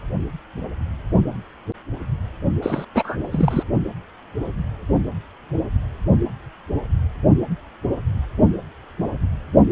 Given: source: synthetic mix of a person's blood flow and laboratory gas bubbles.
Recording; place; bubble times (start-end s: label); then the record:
Doppler ultrasound of blood flow; precordium
2.62-2.85 s: bubbles
2.95-3.17 s: bubbles
3.32-3.63 s: bubbles
From the record:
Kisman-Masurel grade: 212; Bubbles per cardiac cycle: several, 3 to 8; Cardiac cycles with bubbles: 1 to 10%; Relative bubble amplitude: moderate (0.250 to 0.450); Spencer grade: 1 (occasional bubble signal discernible with the cardiac motion signal, with majority of cardiac periods free of bubbles); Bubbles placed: only in the low amplitude regions of the cardiac cycle